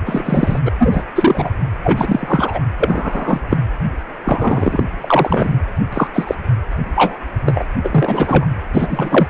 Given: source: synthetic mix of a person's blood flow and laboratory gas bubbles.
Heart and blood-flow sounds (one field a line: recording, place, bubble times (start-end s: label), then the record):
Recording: Doppler ultrasound of blood flow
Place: precordium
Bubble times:
0.05-0.59 s: bubbles
0.65-0.71 s: bubbles
0.79-1.03 s: bubbles
1.15-1.51 s: bubbles
1.83-2.59 s: bubbles
2.80-3.41 s: bubbles
3.51-3.57 s: bubbles
4.25-4.82 s: bubbles
5.00-5.57 s: bubbles
5.92-6.07 s: bubbles
6.13-6.35 s: bubbles
6.96-7.19 s: bubbles
7.46-7.62 s: bubbles
7.83-8.45 s: bubbles
8.73-9.27 s: bubbles
From the record:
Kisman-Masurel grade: 243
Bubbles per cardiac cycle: several, 3 to 8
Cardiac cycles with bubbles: 100%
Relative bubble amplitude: loud (0.450 to 0.775)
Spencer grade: 3 (all of the cardiac periods contain showers or single bubble signals, but not dominating or overriding the cardiac motion signals)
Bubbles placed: anywhere in the cardiac cycle